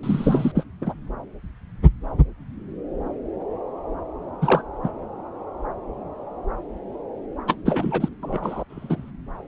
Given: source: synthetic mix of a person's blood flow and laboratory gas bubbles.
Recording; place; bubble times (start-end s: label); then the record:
Doppler ultrasound of blood flow; subclavian vein
0.03-0.52 s: bubbles
0.55-0.64 s: bubbles
0.81-0.94 s: bubbles
4.42-4.62 s: bubbles
4.83-4.89 s: bubbles
7.48-7.55 s: bubbles
7.66-8.08 s: bubbles
8.22-8.64 s: bubbles
8.70-9.10 s: bubbles
From the record:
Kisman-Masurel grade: 222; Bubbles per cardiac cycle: several, 3 to 8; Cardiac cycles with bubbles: 10 to 50%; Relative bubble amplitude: moderate (0.250 to 0.450); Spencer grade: 2 (many but less than half of the cardiac periods contain bubble signals, singularly or in groups); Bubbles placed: anywhere in the cardiac cycle